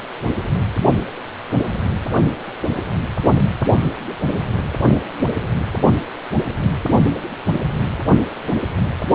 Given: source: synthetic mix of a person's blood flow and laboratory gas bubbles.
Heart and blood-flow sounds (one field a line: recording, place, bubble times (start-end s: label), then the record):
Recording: Doppler ultrasound of blood flow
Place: precordium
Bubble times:
no bubbles
From the record:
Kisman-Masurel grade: 000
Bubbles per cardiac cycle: 0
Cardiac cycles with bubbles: 0%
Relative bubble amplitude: no bubbles discernible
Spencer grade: 0 (complete lack of bubble signals)